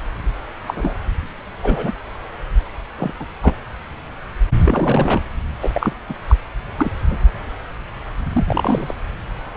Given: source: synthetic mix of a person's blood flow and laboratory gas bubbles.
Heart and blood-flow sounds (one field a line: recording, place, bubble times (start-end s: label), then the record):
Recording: Doppler ultrasound of blood flow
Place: subclavian vein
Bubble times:
0.66-0.94 s: bubbles
1.62-1.93 s: bubbles
2.98-3.12 s: bubbles
3.19-3.27 s: bubbles
3.43-3.56 s: bubbles
4.64-5.21 s: bubbles
5.60-5.93 s: bubbles
6.08-6.13 s: bubbles
6.27-6.35 s: bubbles
6.78-6.92 s: bubbles
7.09-7.17 s: bubbles
8.32-8.93 s: bubbles
From the record:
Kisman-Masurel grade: 232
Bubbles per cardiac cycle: several, 3 to 8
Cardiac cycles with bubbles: 50 to 99%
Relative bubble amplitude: moderate (0.250 to 0.450)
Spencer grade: 3 (all of the cardiac periods contain showers or single bubble signals, but not dominating or overriding the cardiac motion signals)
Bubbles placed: anywhere in the cardiac cycle